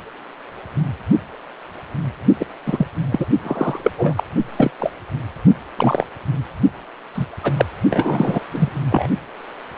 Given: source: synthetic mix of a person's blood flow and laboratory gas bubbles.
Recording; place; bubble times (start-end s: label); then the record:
Doppler ultrasound of blood flow; precordium
2.40-2.46 s: bubbles
2.65-2.86 s: bubbles
3.10-3.26 s: bubbles
3.43-4.24 s: bubbles
4.56-4.71 s: bubbles
4.79-4.91 s: bubbles
5.75-6.06 s: bubbles
7.13-7.26 s: bubbles
7.43-7.53 s: bubbles
7.58-7.65 s: bubbles
7.91-8.46 s: bubbles
8.51-8.69 s: bubbles
8.91-9.07 s: bubbles
From the record:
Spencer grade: 3 (all of the cardiac periods contain showers or single bubble signals, but not dominating or overriding the cardiac motion signals); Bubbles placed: only in the low amplitude regions of the cardiac cycle